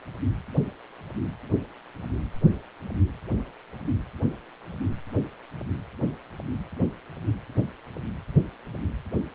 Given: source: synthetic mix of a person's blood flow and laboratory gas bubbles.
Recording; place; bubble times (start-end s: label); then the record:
Doppler ultrasound of blood flow; precordium
no bubbles
From the record:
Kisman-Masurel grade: 000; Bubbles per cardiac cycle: 0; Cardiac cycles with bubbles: 0%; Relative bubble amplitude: no bubbles discernible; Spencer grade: 0 (complete lack of bubble signals)